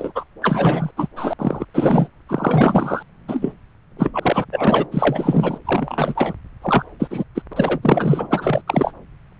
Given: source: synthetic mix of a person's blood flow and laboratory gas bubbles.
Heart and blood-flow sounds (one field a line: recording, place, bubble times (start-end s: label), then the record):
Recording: Doppler ultrasound of blood flow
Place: subclavian vein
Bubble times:
0.00-0.11 s: bubbles
0.15-0.24 s: bubbles
0.42-0.91 s: bubbles
0.96-1.08 s: bubbles
1.16-1.33 s: bubbles
1.38-1.65 s: bubbles
1.74-2.07 s: bubbles
2.28-3.02 s: bubbles
3.28-3.52 s: bubbles
3.98-4.45 s: bubbles
4.52-4.87 s: bubbles
4.91-5.58 s: bubbles
5.65-6.33 s: bubbles
6.62-6.84 s: bubbles
7.00-7.08 s: bubbles
7.10-7.24 s: bubbles
7.35-7.42 s: bubbles
7.51-7.54 s: bubbles
7.56-7.80 s: bubbles
7.83-8.62 s: bubbles
8.67-8.93 s: bubbles
From the record:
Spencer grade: 3 (all of the cardiac periods contain showers or single bubble signals, but not dominating or overriding the cardiac motion signals)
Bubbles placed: anywhere in the cardiac cycle